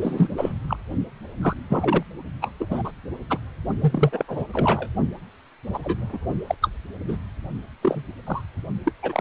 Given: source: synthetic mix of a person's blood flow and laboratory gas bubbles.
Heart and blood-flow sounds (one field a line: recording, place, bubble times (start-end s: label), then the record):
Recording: Doppler ultrasound of blood flow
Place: precordium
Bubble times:
0.01-0.29 s: bubbles
0.37-0.53 s: bubbles
0.68-0.77 s: bubbles
1.42-1.54 s: bubbles
1.69-2.03 s: bubbles
2.42-2.51 s: bubbles
2.59-2.68 s: bubbles
2.71-2.91 s: bubbles
3.29-3.39 s: bubbles
3.80-4.25 s: bubbles
4.28-4.46 s: bubbles
4.53-4.88 s: bubbles
5.74-5.78 s: bubbles
5.82-6.05 s: bubbles
6.12-6.18 s: bubbles
6.47-6.55 s: bubbles
6.62-6.69 s: bubbles
7.08-7.17 s: bubbles
7.82-8.02 s: bubbles
8.26-8.41 s: bubbles
8.83-8.92 s: bubbles
9.02-9.21 s: bubbles
From the record:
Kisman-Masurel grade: 242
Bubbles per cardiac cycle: several, 3 to 8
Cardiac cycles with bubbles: 100%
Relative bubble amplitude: moderate (0.250 to 0.450)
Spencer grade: 3 (all of the cardiac periods contain showers or single bubble signals, but not dominating or overriding the cardiac motion signals)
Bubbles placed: only in the low amplitude regions of the cardiac cycle